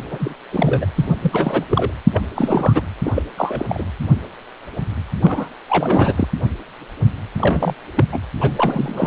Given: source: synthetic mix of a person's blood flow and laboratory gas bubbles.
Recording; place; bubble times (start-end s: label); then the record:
Doppler ultrasound of blood flow; precordium
0.10-0.34 s: bubbles
0.52-0.90 s: bubbles
0.96-1.05 s: bubbles
1.21-1.64 s: bubbles
1.70-1.91 s: bubbles
2.11-2.21 s: bubbles
2.35-2.82 s: bubbles
3.04-3.12 s: bubbles
3.14-3.22 s: bubbles
3.38-3.65 s: bubbles
3.68-3.84 s: bubbles
5.22-5.48 s: bubbles
5.69-6.28 s: bubbles
7.38-7.74 s: bubbles
7.96-8.04 s: bubbles
8.12-8.20 s: bubbles
8.40-9.07 s: bubbles
From the record:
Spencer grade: 3 (all of the cardiac periods contain showers or single bubble signals, but not dominating or overriding the cardiac motion signals); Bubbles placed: anywhere in the cardiac cycle